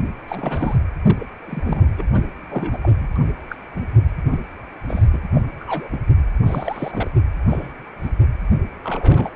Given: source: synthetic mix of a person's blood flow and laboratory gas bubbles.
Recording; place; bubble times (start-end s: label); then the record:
Doppler ultrasound of blood flow; precordium
0.28-0.76 s: bubbles
1.06-1.25 s: bubbles
1.46-1.89 s: bubbles
1.98-2.03 s: bubbles
2.12-2.26 s: bubbles
2.42-2.46 s: bubbles
2.49-2.78 s: bubbles
2.82-2.90 s: bubbles
2.99-3.08 s: bubbles
3.15-3.18 s: bubbles
3.49-3.56 s: bubbles
3.75-3.86 s: bubbles
4.31-4.43 s: bubbles
4.88-5.20 s: bubbles
5.34-5.42 s: bubbles
5.60-5.98 s: bubbles
6.46-7.08 s: bubbles
7.49-7.73 s: bubbles
8.03-8.09 s: bubbles
8.84-9.36 s: bubbles
From the record:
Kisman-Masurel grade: 242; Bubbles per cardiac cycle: several, 3 to 8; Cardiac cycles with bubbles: 100%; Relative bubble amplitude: moderate (0.250 to 0.450); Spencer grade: 3 (all of the cardiac periods contain showers or single bubble signals, but not dominating or overriding the cardiac motion signals); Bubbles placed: anywhere in the cardiac cycle